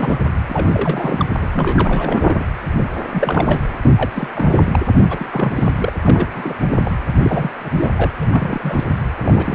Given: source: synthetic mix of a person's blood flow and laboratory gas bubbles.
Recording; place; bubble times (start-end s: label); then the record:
Doppler ultrasound of blood flow; precordium
0.00-0.21 s: bubbles
0.48-1.26 s: bubbles
1.38-1.49 s: bubbles
1.52-2.45 s: bubbles
2.75-2.83 s: bubbles
3.11-3.64 s: bubbles
3.96-4.11 s: bubbles
4.14-4.29 s: bubbles
4.33-4.79 s: bubbles
4.95-5.00 s: bubbles
5.09-5.28 s: bubbles
5.30-5.75 s: bubbles
5.79-5.92 s: bubbles
6.05-6.30 s: bubbles
6.34-6.54 s: bubbles
6.70-6.78 s: bubbles
6.83-6.92 s: bubbles
7.12-7.19 s: bubbles
7.22-7.50 s: bubbles
7.60-7.70 s: bubbles
7.76-7.92 s: bubbles
7.97-8.12 s: bubbles
8.20-8.84 s: bubbles
9.21-9.55 s: bubbles
From the record:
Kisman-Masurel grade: 342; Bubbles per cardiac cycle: rolling drumbeat, 9 or more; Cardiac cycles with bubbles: 100%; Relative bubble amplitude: moderate (0.250 to 0.450); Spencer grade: 3 (all of the cardiac periods contain showers or single bubble signals, but not dominating or overriding the cardiac motion signals); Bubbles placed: anywhere in the cardiac cycle